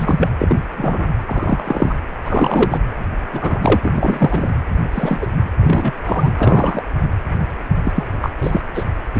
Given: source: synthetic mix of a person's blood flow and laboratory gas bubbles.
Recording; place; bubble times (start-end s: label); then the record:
Doppler ultrasound of blood flow; precordium
0.00-0.29 s: bubbles
0.39-0.57 s: bubbles
0.77-1.07 s: bubbles
1.27-1.94 s: bubbles
2.25-2.78 s: bubbles
3.33-3.59 s: bubbles
3.62-3.80 s: bubbles
3.83-4.50 s: bubbles
4.92-5.27 s: bubbles
5.60-5.92 s: bubbles
6.03-6.33 s: bubbles
6.39-6.83 s: bubbles
7.84-7.92 s: bubbles
7.95-8.07 s: bubbles
8.21-8.29 s: bubbles
8.38-8.61 s: bubbles
8.74-8.85 s: bubbles
9.15-9.20 s: bubbles
From the record:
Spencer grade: 3 (all of the cardiac periods contain showers or single bubble signals, but not dominating or overriding the cardiac motion signals); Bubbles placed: anywhere in the cardiac cycle